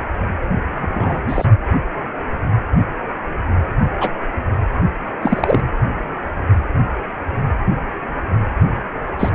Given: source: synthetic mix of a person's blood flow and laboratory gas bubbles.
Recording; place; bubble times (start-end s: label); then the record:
Doppler ultrasound of blood flow; precordium
0.81-1.22 s: bubbles
1.28-1.45 s: bubbles
4.00-4.11 s: bubbles
5.21-5.60 s: bubbles
9.19-9.29 s: bubbles
From the record:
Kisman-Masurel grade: 123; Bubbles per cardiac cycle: 1 to 2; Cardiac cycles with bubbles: 10 to 50%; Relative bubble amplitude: loud (0.450 to 0.775); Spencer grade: 2 (many but less than half of the cardiac periods contain bubble signals, singularly or in groups); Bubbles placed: anywhere in the cardiac cycle